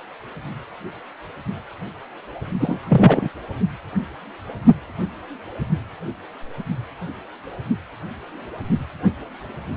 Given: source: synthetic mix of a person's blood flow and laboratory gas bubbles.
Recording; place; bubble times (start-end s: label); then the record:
Doppler ultrasound of blood flow; precordium
2.60-2.78 s: bubbles
2.88-3.29 s: bubbles
From the record:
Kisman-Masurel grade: 213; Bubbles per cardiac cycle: several, 3 to 8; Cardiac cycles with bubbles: 1 to 10%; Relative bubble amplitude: loud (0.450 to 0.775); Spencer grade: 1 (occasional bubble signal discernible with the cardiac motion signal, with majority of cardiac periods free of bubbles); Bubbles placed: only in the low amplitude regions of the cardiac cycle